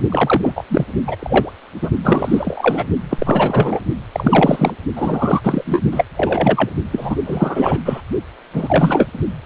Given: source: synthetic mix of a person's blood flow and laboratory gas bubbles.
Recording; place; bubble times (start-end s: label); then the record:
Doppler ultrasound of blood flow; precordium
0.09-0.53 s: bubbles
0.55-0.64 s: bubbles
0.69-0.85 s: bubbles
1.07-1.16 s: bubbles
1.19-1.53 s: bubbles
1.81-1.90 s: bubbles
2.03-2.84 s: bubbles
3.09-3.80 s: bubbles
4.12-4.74 s: bubbles
4.96-5.81 s: bubbles
5.92-6.06 s: bubbles
6.17-6.70 s: bubbles
6.92-7.16 s: bubbles
7.25-7.79 s: bubbles
7.85-8.01 s: bubbles
8.54-9.06 s: bubbles
9.44-9.46 s: bubbles
From the record:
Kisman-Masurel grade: 343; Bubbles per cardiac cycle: rolling drumbeat, 9 or more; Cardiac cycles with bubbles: 100%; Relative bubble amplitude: loud (0.450 to 0.775); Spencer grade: 3 (all of the cardiac periods contain showers or single bubble signals, but not dominating or overriding the cardiac motion signals); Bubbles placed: only in the low amplitude regions of the cardiac cycle